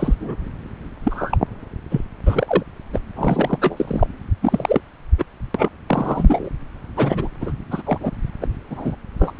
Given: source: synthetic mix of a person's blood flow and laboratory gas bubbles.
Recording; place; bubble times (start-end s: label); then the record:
Doppler ultrasound of blood flow; subclavian vein
0.00-0.15 s: bubbles
0.20-0.35 s: bubbles
1.03-1.38 s: bubbles
1.90-2.01 s: bubbles
2.25-2.63 s: bubbles
2.93-3.00 s: bubbles
3.15-3.58 s: bubbles
3.61-4.07 s: bubbles
4.42-4.80 s: bubbles
5.18-5.25 s: bubbles
5.54-5.68 s: bubbles
5.87-6.49 s: bubbles
6.96-7.28 s: bubbles
7.41-7.52 s: bubbles
7.70-7.83 s: bubbles
7.85-8.11 s: bubbles
8.41-8.47 s: bubbles
8.70-8.96 s: bubbles
9.19-9.32 s: bubbles
From the record:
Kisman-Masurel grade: 242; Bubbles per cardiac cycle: several, 3 to 8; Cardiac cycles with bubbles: 100%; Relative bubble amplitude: moderate (0.250 to 0.450); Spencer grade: 3 (all of the cardiac periods contain showers or single bubble signals, but not dominating or overriding the cardiac motion signals); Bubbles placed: anywhere in the cardiac cycle